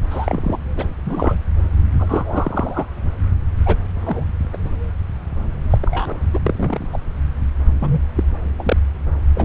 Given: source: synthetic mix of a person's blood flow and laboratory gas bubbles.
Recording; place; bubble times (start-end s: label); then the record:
Doppler ultrasound of blood flow; subclavian vein
0.11-0.58 s: bubbles
0.75-0.84 s: bubbles
1.04-1.35 s: bubbles
1.99-2.86 s: bubbles
3.66-3.78 s: bubbles
4.05-4.25 s: bubbles
4.53-4.57 s: bubbles
5.70-5.78 s: bubbles
5.82-6.16 s: bubbles
6.33-6.39 s: bubbles
6.46-6.87 s: bubbles
6.92-6.98 s: bubbles
7.80-8.00 s: bubbles
8.15-8.23 s: bubbles
8.59-8.77 s: bubbles
9.35-9.45 s: bubbles
From the record:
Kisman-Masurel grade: 232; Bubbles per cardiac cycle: several, 3 to 8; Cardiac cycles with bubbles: 50 to 99%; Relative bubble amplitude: moderate (0.250 to 0.450); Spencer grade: 3 (all of the cardiac periods contain showers or single bubble signals, but not dominating or overriding the cardiac motion signals); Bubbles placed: anywhere in the cardiac cycle